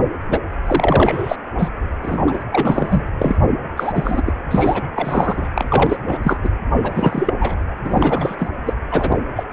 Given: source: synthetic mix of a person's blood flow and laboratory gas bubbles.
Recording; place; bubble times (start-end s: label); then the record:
Doppler ultrasound of blood flow; precordium
0.30-0.39 s: bubbles
0.66-1.36 s: bubbles
1.58-1.69 s: bubbles
2.03-2.23 s: bubbles
2.26-2.44 s: bubbles
2.52-3.02 s: bubbles
3.19-3.36 s: bubbles
3.76-4.23 s: bubbles
4.26-4.34 s: bubbles
4.50-4.83 s: bubbles
4.95-5.48 s: bubbles
5.57-5.97 s: bubbles
6.07-6.18 s: bubbles
6.23-6.37 s: bubbles
6.43-6.50 s: bubbles
6.82-7.34 s: bubbles
7.40-7.57 s: bubbles
7.84-8.35 s: bubbles
8.38-8.50 s: bubbles
8.65-8.73 s: bubbles
8.90-9.17 s: bubbles
9.36-9.44 s: bubbles
From the record:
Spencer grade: 3 (all of the cardiac periods contain showers or single bubble signals, but not dominating or overriding the cardiac motion signals); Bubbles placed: anywhere in the cardiac cycle